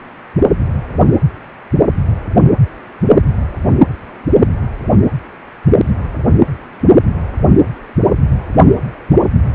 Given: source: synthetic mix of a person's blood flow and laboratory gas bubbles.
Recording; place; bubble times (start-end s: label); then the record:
Doppler ultrasound of blood flow; precordium
no bubbles
From the record:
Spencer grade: 0 (complete lack of bubble signals)